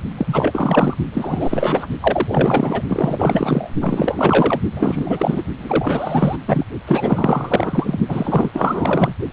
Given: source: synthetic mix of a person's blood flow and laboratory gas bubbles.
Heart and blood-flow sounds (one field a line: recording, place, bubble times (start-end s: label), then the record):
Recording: Doppler ultrasound of blood flow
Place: precordium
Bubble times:
0.17-0.96 s: bubbles
1.12-1.87 s: bubbles
2.00-2.81 s: bubbles
2.88-3.71 s: bubbles
3.81-4.59 s: bubbles
4.72-5.42 s: bubbles
5.58-6.36 s: bubbles
6.46-6.65 s: bubbles
6.87-7.99 s: bubbles
8.08-8.50 s: bubbles
8.53-9.14 s: bubbles
From the record:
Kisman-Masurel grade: 444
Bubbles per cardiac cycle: continuous sound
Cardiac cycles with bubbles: 100%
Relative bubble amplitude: maximal (0.775 to 0.999)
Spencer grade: 4 (maximum detectable bubble signal sounding continuously throughout systole and diastole of every cardiac period, and overriding the amplitude of the normal cardiac signals)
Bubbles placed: only in the low amplitude regions of the cardiac cycle